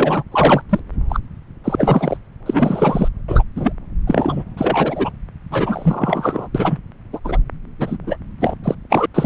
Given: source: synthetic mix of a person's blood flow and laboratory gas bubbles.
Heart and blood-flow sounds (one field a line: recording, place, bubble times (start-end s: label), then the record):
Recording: Doppler ultrasound of blood flow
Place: subclavian vein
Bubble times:
0.00-0.23 s: bubbles
0.32-0.61 s: bubbles
0.69-0.80 s: bubbles
1.09-1.20 s: bubbles
1.64-2.17 s: bubbles
2.46-3.08 s: bubbles
3.28-3.43 s: bubbles
3.56-3.73 s: bubbles
4.07-4.44 s: bubbles
4.57-5.10 s: bubbles
5.51-6.48 s: bubbles
6.54-6.79 s: bubbles
7.12-7.19 s: bubbles
7.24-7.38 s: bubbles
7.78-7.97 s: bubbles
8.07-8.17 s: bubbles
8.40-8.55 s: bubbles
8.63-8.75 s: bubbles
8.89-9.06 s: bubbles
9.14-9.26 s: bubbles
From the record:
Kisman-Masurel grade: 243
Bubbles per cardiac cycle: several, 3 to 8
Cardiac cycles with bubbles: 100%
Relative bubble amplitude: loud (0.450 to 0.775)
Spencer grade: 3 (all of the cardiac periods contain showers or single bubble signals, but not dominating or overriding the cardiac motion signals)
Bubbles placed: anywhere in the cardiac cycle